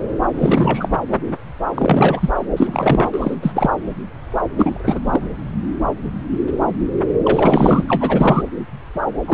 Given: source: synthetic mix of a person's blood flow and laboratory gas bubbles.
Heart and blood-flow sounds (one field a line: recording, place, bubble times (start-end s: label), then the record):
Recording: Doppler ultrasound of blood flow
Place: subclavian vein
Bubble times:
0.39-0.89 s: bubbles
1.75-2.29 s: bubbles
2.56-3.09 s: bubbles
3.12-3.34 s: bubbles
3.42-3.51 s: bubbles
3.54-3.70 s: bubbles
4.57-5.00 s: bubbles
5.12-5.29 s: bubbles
7.24-7.84 s: bubbles
7.88-8.43 s: bubbles
9.26-9.34 s: bubbles
From the record:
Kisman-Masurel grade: 333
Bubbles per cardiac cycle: rolling drumbeat, 9 or more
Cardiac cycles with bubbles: 50 to 99%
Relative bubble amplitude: loud (0.450 to 0.775)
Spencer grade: 3 (all of the cardiac periods contain showers or single bubble signals, but not dominating or overriding the cardiac motion signals)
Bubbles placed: anywhere in the cardiac cycle